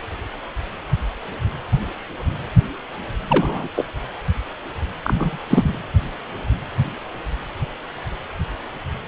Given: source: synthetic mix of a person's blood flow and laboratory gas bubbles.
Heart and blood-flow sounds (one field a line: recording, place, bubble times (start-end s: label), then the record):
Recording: Doppler ultrasound of blood flow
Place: precordium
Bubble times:
3.28-3.68 s: bubbles
3.75-3.85 s: bubbles
5.04-5.38 s: bubbles
5.50-5.80 s: bubbles
From the record:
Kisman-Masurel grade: 223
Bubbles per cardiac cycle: several, 3 to 8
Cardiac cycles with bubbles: 10 to 50%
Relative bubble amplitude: loud (0.450 to 0.775)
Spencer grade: 2 (many but less than half of the cardiac periods contain bubble signals, singularly or in groups)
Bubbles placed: anywhere in the cardiac cycle